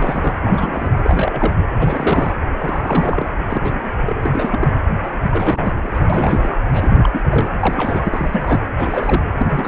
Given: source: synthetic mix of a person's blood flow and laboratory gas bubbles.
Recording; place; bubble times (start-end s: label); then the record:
Doppler ultrasound of blood flow; precordium
0.00-0.36 s: bubbles
0.42-0.89 s: bubbles
1.02-1.52 s: bubbles
1.79-2.33 s: bubbles
2.58-3.31 s: bubbles
3.44-3.97 s: bubbles
4.05-4.69 s: bubbles
5.02-5.10 s: bubbles
5.22-6.07 s: bubbles
6.09-6.50 s: bubbles
6.73-7.21 s: bubbles
7.30-7.48 s: bubbles
7.59-8.62 s: bubbles
8.76-9.23 s: bubbles
9.38-9.68 s: bubbles
From the record:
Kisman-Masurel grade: 342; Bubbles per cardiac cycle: rolling drumbeat, 9 or more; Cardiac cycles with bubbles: 100%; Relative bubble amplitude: moderate (0.250 to 0.450); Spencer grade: 3 (all of the cardiac periods contain showers or single bubble signals, but not dominating or overriding the cardiac motion signals); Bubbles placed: anywhere in the cardiac cycle